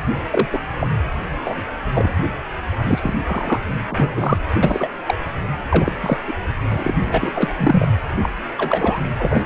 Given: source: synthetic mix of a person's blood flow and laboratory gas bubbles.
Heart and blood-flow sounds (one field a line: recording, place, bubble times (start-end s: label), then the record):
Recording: Doppler ultrasound of blood flow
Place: precordium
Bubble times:
0.30-0.48 s: bubbles
0.53-0.60 s: bubbles
0.81-0.87 s: bubbles
1.44-1.64 s: bubbles
1.94-2.12 s: bubbles
2.83-3.14 s: bubbles
3.25-3.60 s: bubbles
3.89-4.38 s: bubbles
4.62-4.90 s: bubbles
5.06-5.14 s: bubbles
5.70-5.92 s: bubbles
6.02-6.17 s: bubbles
6.27-6.33 s: bubbles
6.69-6.93 s: bubbles
7.04-7.49 s: bubbles
7.57-7.88 s: bubbles
8.19-8.29 s: bubbles
8.57-9.00 s: bubbles
9.19-9.44 s: bubbles
From the record:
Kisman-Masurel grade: 243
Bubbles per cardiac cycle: several, 3 to 8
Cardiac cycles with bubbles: 100%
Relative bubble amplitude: loud (0.450 to 0.775)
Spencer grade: 3 (all of the cardiac periods contain showers or single bubble signals, but not dominating or overriding the cardiac motion signals)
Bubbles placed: anywhere in the cardiac cycle